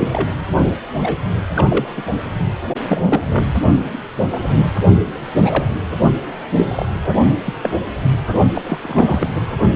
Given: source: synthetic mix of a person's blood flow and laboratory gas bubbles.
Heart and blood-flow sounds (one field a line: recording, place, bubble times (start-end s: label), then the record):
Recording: Doppler ultrasound of blood flow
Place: precordium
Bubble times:
0.00-0.08 s: bubbles
0.12-0.35 s: bubbles
0.98-1.16 s: bubbles
1.56-1.88 s: bubbles
1.97-2.02 s: bubbles
2.88-3.53 s: bubbles
5.41-5.73 s: bubbles
6.57-6.86 s: bubbles
7.04-7.12 s: bubbles
7.45-7.54 s: bubbles
7.61-7.71 s: bubbles
8.54-8.62 s: bubbles
8.64-8.79 s: bubbles
8.84-9.29 s: bubbles
9.35-9.42 s: bubbles
From the record:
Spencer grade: 3 (all of the cardiac periods contain showers or single bubble signals, but not dominating or overriding the cardiac motion signals)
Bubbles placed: only in the low amplitude regions of the cardiac cycle